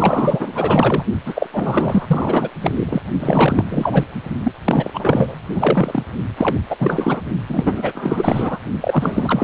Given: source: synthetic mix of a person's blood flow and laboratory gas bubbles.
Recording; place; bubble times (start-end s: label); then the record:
Doppler ultrasound of blood flow; precordium
0.00-1.04 s: bubbles
1.25-1.46 s: bubbles
1.52-2.49 s: bubbles
2.62-3.02 s: bubbles
3.19-3.65 s: bubbles
3.69-4.04 s: bubbles
4.44-4.54 s: bubbles
4.64-5.39 s: bubbles
5.53-6.02 s: bubbles
6.37-6.59 s: bubbles
6.69-6.76 s: bubbles
6.79-7.21 s: bubbles
7.47-8.59 s: bubbles
8.81-9.44 s: bubbles
From the record:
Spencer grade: 4 (maximum detectable bubble signal sounding continuously throughout systole and diastole of every cardiac period, and overriding the amplitude of the normal cardiac signals); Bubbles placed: only in the low amplitude regions of the cardiac cycle